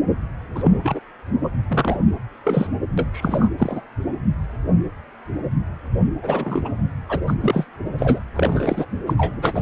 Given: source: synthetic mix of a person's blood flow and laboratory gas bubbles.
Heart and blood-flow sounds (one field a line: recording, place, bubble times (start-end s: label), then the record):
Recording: Doppler ultrasound of blood flow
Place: precordium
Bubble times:
0.55-0.99 s: bubbles
1.43-1.48 s: bubbles
1.68-1.99 s: bubbles
2.45-2.67 s: bubbles
2.98-3.08 s: bubbles
3.12-3.50 s: bubbles
3.58-3.81 s: bubbles
6.22-6.69 s: bubbles
7.08-7.20 s: bubbles
7.26-7.34 s: bubbles
7.40-7.65 s: bubbles
7.98-8.20 s: bubbles
8.34-8.86 s: bubbles
9.07-9.13 s: bubbles
9.17-9.34 s: bubbles
9.41-9.62 s: bubbles
From the record:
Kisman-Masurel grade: 232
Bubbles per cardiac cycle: several, 3 to 8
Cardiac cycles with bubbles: 50 to 99%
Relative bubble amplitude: moderate (0.250 to 0.450)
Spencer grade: 3 (all of the cardiac periods contain showers or single bubble signals, but not dominating or overriding the cardiac motion signals)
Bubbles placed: anywhere in the cardiac cycle